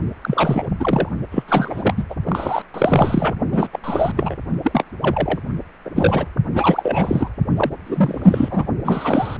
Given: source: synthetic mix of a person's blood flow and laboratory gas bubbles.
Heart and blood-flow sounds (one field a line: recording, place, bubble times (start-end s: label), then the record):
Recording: Doppler ultrasound of blood flow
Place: precordium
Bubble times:
0.21-0.69 s: bubbles
0.79-1.09 s: bubbles
1.31-1.43 s: bubbles
1.48-2.04 s: bubbles
2.10-2.15 s: bubbles
2.26-2.62 s: bubbles
2.74-3.35 s: bubbles
3.52-3.67 s: bubbles
3.72-3.80 s: bubbles
3.84-4.37 s: bubbles
4.63-4.84 s: bubbles
5.01-5.39 s: bubbles
5.85-5.90 s: bubbles
5.95-6.26 s: bubbles
6.54-7.29 s: bubbles
7.56-7.72 s: bubbles
7.86-8.65 s: bubbles
8.84-9.37 s: bubbles
From the record:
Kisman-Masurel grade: 343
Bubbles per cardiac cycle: rolling drumbeat, 9 or more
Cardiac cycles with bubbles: 100%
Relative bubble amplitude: loud (0.450 to 0.775)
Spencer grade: 3 (all of the cardiac periods contain showers or single bubble signals, but not dominating or overriding the cardiac motion signals)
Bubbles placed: only in the low amplitude regions of the cardiac cycle